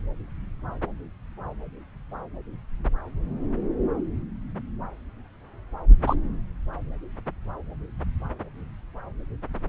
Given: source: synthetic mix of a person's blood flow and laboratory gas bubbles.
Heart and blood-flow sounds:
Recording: Doppler ultrasound of blood flow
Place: subclavian vein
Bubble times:
6.06-6.16 s: bubbles
From the record:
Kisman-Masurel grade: 113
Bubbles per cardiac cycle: 1 to 2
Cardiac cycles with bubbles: 1 to 10%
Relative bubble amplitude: loud (0.450 to 0.775)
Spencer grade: 1 (occasional bubble signal discernible with the cardiac motion signal, with majority of cardiac periods free of bubbles)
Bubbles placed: anywhere in the cardiac cycle

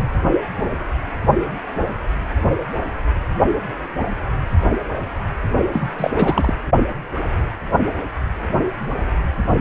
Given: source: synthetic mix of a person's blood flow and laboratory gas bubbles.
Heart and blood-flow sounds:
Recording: Doppler ultrasound of blood flow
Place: precordium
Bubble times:
5.73-5.90 s: bubbles
5.98-6.11 s: bubbles
6.16-6.54 s: bubbles
From the record:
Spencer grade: 1 (occasional bubble signal discernible with the cardiac motion signal, with majority of cardiac periods free of bubbles)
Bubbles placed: only in the low amplitude regions of the cardiac cycle

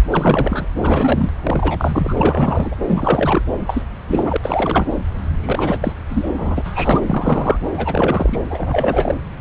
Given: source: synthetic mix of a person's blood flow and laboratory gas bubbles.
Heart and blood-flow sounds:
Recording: Doppler ultrasound of blood flow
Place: subclavian vein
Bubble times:
0.10-0.67 s: bubbles
0.75-1.31 s: bubbles
1.43-2.75 s: bubbles
2.86-3.42 s: bubbles
3.67-3.82 s: bubbles
4.08-4.37 s: bubbles
4.42-4.87 s: bubbles
5.39-5.93 s: bubbles
6.08-6.30 s: bubbles
6.37-7.01 s: bubbles
7.07-7.58 s: bubbles
7.75-8.38 s: bubbles
8.50-9.15 s: bubbles
From the record:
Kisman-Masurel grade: 333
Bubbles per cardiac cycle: rolling drumbeat, 9 or more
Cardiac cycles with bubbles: 50 to 99%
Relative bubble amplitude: loud (0.450 to 0.775)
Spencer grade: 3 (all of the cardiac periods contain showers or single bubble signals, but not dominating or overriding the cardiac motion signals)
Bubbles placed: anywhere in the cardiac cycle

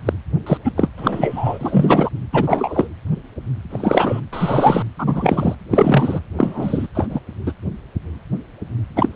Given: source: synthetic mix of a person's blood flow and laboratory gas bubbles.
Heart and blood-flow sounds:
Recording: Doppler ultrasound of blood flow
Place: precordium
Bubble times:
0.05-0.13 s: bubbles
0.46-0.57 s: bubbles
0.65-0.73 s: bubbles
0.77-0.90 s: bubbles
0.97-2.10 s: bubbles
2.32-2.89 s: bubbles
3.70-4.21 s: bubbles
4.32-4.83 s: bubbles
4.98-5.55 s: bubbles
5.71-6.20 s: bubbles
6.37-6.87 s: bubbles
6.95-7.20 s: bubbles
7.46-7.52 s: bubbles
8.96-9.09 s: bubbles
From the record:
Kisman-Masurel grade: 233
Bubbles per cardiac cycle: several, 3 to 8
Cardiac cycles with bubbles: 50 to 99%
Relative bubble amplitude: loud (0.450 to 0.775)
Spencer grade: 3 (all of the cardiac periods contain showers or single bubble signals, but not dominating or overriding the cardiac motion signals)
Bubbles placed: anywhere in the cardiac cycle

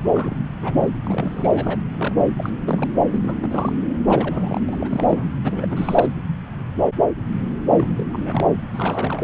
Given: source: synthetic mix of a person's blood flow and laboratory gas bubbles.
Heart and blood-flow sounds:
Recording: Doppler ultrasound of blood flow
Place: subclavian vein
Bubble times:
0.05-0.36 s: bubbles
0.62-0.90 s: bubbles
1.04-1.80 s: bubbles
1.98-2.14 s: bubbles
2.38-2.57 s: bubbles
2.65-2.89 s: bubbles
3.05-3.35 s: bubbles
3.40-3.73 s: bubbles
4.06-4.60 s: bubbles
4.68-4.76 s: bubbles
4.80-5.24 s: bubbles
5.43-6.08 s: bubbles
7.71-7.88 s: bubbles
7.97-8.04 s: bubbles
8.12-8.55 s: bubbles
8.73-9.23 s: bubbles
From the record:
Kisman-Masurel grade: 332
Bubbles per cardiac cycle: rolling drumbeat, 9 or more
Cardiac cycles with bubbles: 50 to 99%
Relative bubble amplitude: moderate (0.250 to 0.450)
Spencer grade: 3 (all of the cardiac periods contain showers or single bubble signals, but not dominating or overriding the cardiac motion signals)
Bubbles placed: anywhere in the cardiac cycle

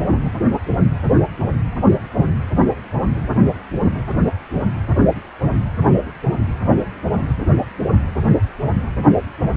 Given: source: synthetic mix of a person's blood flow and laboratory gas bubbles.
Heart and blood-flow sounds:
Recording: Doppler ultrasound of blood flow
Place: precordium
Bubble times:
no bubbles
From the record:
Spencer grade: 0 (complete lack of bubble signals)

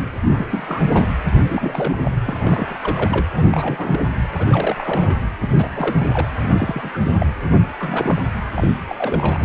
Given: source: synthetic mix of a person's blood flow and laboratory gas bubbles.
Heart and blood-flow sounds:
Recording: Doppler ultrasound of blood flow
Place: precordium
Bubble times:
0.31-1.07 s: bubbles
1.43-1.96 s: bubbles
2.04-2.11 s: bubbles
2.27-2.77 s: bubbles
2.81-3.26 s: bubbles
3.35-4.08 s: bubbles
4.33-5.19 s: bubbles
5.39-6.29 s: bubbles
6.40-6.90 s: bubbles
6.94-6.99 s: bubbles
7.04-7.12 s: bubbles
7.20-7.26 s: bubbles
7.62-7.68 s: bubbles
7.79-8.21 s: bubbles
8.56-8.68 s: bubbles
8.88-8.96 s: bubbles
8.98-9.45 s: bubbles
From the record:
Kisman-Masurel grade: 342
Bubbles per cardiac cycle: rolling drumbeat, 9 or more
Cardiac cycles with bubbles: 100%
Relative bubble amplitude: moderate (0.250 to 0.450)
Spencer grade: 3 (all of the cardiac periods contain showers or single bubble signals, but not dominating or overriding the cardiac motion signals)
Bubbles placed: anywhere in the cardiac cycle

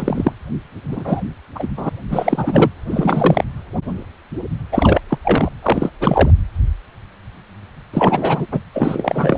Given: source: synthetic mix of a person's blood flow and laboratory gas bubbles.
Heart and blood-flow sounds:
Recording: Doppler ultrasound of blood flow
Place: precordium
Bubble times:
0.00-0.33 s: bubbles
0.92-1.20 s: bubbles
1.55-1.67 s: bubbles
1.77-1.90 s: bubbles
2.10-2.69 s: bubbles
2.85-3.44 s: bubbles
4.71-5.00 s: bubbles
5.09-5.18 s: bubbles
5.23-5.49 s: bubbles
5.62-5.90 s: bubbles
6.00-6.30 s: bubbles
7.93-8.46 s: bubbles
8.51-8.59 s: bubbles
8.73-9.38 s: bubbles
From the record:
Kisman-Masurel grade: 333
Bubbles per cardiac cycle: rolling drumbeat, 9 or more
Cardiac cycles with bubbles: 50 to 99%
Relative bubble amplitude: loud (0.450 to 0.775)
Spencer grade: 3 (all of the cardiac periods contain showers or single bubble signals, but not dominating or overriding the cardiac motion signals)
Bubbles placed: anywhere in the cardiac cycle

